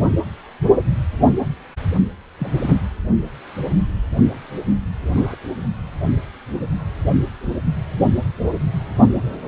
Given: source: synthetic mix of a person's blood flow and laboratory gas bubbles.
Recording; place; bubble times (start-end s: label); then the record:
Doppler ultrasound of blood flow; precordium
2.39-2.75 s: bubbles
5.08-5.36 s: bubbles
From the record:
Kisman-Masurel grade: 122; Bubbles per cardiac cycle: 1 to 2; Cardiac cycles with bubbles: 10 to 50%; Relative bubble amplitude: moderate (0.250 to 0.450); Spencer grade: 2 (many but less than half of the cardiac periods contain bubble signals, singularly or in groups); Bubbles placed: only in the low amplitude regions of the cardiac cycle